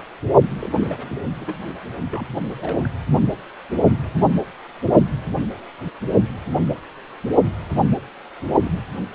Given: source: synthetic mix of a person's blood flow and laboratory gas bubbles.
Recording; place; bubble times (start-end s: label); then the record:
Doppler ultrasound of blood flow; precordium
0.59-1.17 s: bubbles
1.40-1.54 s: bubbles
2.11-2.27 s: bubbles
2.57-2.88 s: bubbles
8.64-8.83 s: bubbles
From the record:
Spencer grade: 2 (many but less than half of the cardiac periods contain bubble signals, singularly or in groups); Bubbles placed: only in the low amplitude regions of the cardiac cycle